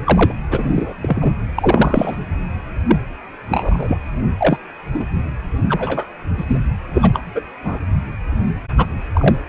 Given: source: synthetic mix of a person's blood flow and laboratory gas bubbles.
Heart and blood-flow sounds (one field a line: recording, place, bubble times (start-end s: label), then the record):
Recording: Doppler ultrasound of blood flow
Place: precordium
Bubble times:
0.06-0.33 s: bubbles
0.51-0.93 s: bubbles
1.02-1.33 s: bubbles
1.55-2.17 s: bubbles
2.88-2.96 s: bubbles
3.50-3.97 s: bubbles
4.38-4.58 s: bubbles
4.94-5.05 s: bubbles
5.68-6.09 s: bubbles
6.38-6.44 s: bubbles
6.48-6.59 s: bubbles
6.93-7.21 s: bubbles
7.34-7.41 s: bubbles
7.64-7.78 s: bubbles
8.76-8.97 s: bubbles
9.13-9.38 s: bubbles
From the record:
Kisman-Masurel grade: 243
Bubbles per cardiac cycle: several, 3 to 8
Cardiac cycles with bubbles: 100%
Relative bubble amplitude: loud (0.450 to 0.775)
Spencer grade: 3 (all of the cardiac periods contain showers or single bubble signals, but not dominating or overriding the cardiac motion signals)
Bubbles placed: anywhere in the cardiac cycle